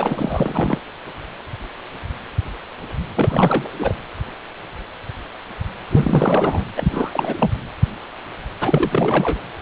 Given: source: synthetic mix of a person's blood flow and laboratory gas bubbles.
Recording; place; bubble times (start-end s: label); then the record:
Doppler ultrasound of blood flow; precordium
0.00-0.78 s: bubbles
3.15-3.71 s: bubbles
3.79-3.94 s: bubbles
5.90-6.65 s: bubbles
6.76-7.51 s: bubbles
8.60-9.41 s: bubbles
From the record:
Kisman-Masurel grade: 333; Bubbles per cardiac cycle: rolling drumbeat, 9 or more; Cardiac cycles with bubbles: 50 to 99%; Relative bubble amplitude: loud (0.450 to 0.775); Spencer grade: 3 (all of the cardiac periods contain showers or single bubble signals, but not dominating or overriding the cardiac motion signals); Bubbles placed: anywhere in the cardiac cycle